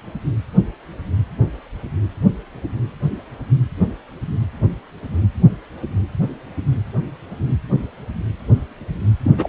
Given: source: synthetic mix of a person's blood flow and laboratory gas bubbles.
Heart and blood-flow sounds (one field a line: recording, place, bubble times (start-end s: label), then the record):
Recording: Doppler ultrasound of blood flow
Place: precordium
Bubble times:
9.23-9.31 s: bubbles
9.38-9.49 s: bubbles
From the record:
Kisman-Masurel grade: 212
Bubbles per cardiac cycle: several, 3 to 8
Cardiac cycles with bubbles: 1 to 10%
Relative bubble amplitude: moderate (0.250 to 0.450)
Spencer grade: 1 (occasional bubble signal discernible with the cardiac motion signal, with majority of cardiac periods free of bubbles)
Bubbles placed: anywhere in the cardiac cycle